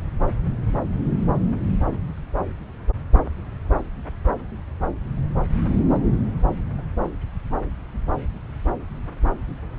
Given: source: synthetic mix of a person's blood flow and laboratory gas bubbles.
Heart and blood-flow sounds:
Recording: Doppler ultrasound of blood flow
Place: subclavian vein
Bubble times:
no bubbles
From the record:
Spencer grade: 0 (complete lack of bubble signals)

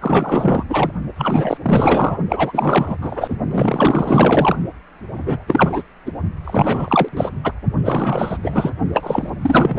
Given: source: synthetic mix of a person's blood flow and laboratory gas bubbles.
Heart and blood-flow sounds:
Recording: Doppler ultrasound of blood flow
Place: precordium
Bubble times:
0.01-0.65 s: bubbles
0.69-0.92 s: bubbles
1.16-1.57 s: bubbles
1.62-2.19 s: bubbles
2.29-2.95 s: bubbles
3.01-3.37 s: bubbles
3.51-4.57 s: bubbles
5.14-5.44 s: bubbles
5.47-5.83 s: bubbles
6.06-6.11 s: bubbles
6.44-7.08 s: bubbles
7.12-7.29 s: bubbles
7.44-7.52 s: bubbles
7.82-8.38 s: bubbles
8.43-8.71 s: bubbles
8.93-9.29 s: bubbles
9.42-9.79 s: bubbles
From the record:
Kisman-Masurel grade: 444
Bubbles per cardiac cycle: continuous sound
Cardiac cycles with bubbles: 100%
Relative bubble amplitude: maximal (0.775 to 0.999)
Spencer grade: 4 (maximum detectable bubble signal sounding continuously throughout systole and diastole of every cardiac period, and overriding the amplitude of the normal cardiac signals)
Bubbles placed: only in the low amplitude regions of the cardiac cycle

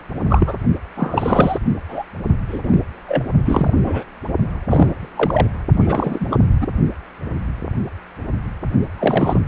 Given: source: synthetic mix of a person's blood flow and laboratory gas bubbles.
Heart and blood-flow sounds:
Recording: Doppler ultrasound of blood flow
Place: precordium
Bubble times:
0.29-0.56 s: bubbles
0.97-1.58 s: bubbles
1.89-2.04 s: bubbles
2.48-2.59 s: bubbles
2.63-2.79 s: bubbles
3.07-3.23 s: bubbles
3.44-3.73 s: bubbles
3.83-4.04 s: bubbles
4.67-5.09 s: bubbles
5.16-5.47 s: bubbles
5.72-6.26 s: bubbles
6.30-6.40 s: bubbles
6.61-6.68 s: bubbles
8.99-9.39 s: bubbles
From the record:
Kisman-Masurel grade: 233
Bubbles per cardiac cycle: several, 3 to 8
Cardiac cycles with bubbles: 50 to 99%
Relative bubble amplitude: loud (0.450 to 0.775)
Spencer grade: 3 (all of the cardiac periods contain showers or single bubble signals, but not dominating or overriding the cardiac motion signals)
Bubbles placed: only in the low amplitude regions of the cardiac cycle

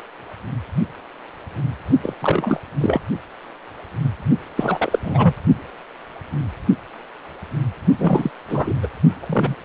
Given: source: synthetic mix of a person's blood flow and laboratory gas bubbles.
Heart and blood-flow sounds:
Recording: Doppler ultrasound of blood flow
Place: precordium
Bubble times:
2.02-2.14 s: bubbles
2.21-2.60 s: bubbles
2.80-3.00 s: bubbles
4.56-4.99 s: bubbles
5.04-5.34 s: bubbles
7.99-8.31 s: bubbles
8.48-8.74 s: bubbles
8.83-8.88 s: bubbles
9.20-9.56 s: bubbles
From the record:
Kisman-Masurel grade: 333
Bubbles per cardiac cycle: rolling drumbeat, 9 or more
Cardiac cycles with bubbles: 50 to 99%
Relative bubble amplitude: loud (0.450 to 0.775)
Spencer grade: 3 (all of the cardiac periods contain showers or single bubble signals, but not dominating or overriding the cardiac motion signals)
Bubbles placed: only in the low amplitude regions of the cardiac cycle

